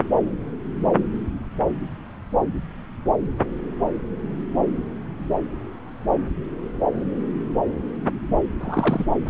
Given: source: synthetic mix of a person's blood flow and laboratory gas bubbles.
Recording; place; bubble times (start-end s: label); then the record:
Doppler ultrasound of blood flow; subclavian vein
8.60-9.05 s: bubbles
From the record:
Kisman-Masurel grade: 212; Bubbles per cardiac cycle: several, 3 to 8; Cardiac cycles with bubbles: 1 to 10%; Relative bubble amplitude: moderate (0.250 to 0.450); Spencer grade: 1 (occasional bubble signal discernible with the cardiac motion signal, with majority of cardiac periods free of bubbles); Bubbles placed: anywhere in the cardiac cycle